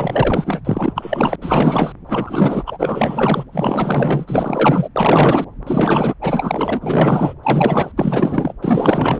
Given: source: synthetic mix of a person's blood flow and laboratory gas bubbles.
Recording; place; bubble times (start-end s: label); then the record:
Doppler ultrasound of blood flow; subclavian vein
0.00-0.60 s: bubbles
0.65-0.93 s: bubbles
0.96-1.36 s: bubbles
1.41-1.93 s: bubbles
2.06-2.64 s: bubbles
2.67-3.44 s: bubbles
3.52-4.88 s: bubbles
4.95-5.44 s: bubbles
5.67-6.14 s: bubbles
6.21-7.33 s: bubbles
7.42-7.92 s: bubbles
7.96-8.54 s: bubbles
8.61-9.20 s: bubbles
From the record:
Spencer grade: 4 (maximum detectable bubble signal sounding continuously throughout systole and diastole of every cardiac period, and overriding the amplitude of the normal cardiac signals); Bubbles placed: anywhere in the cardiac cycle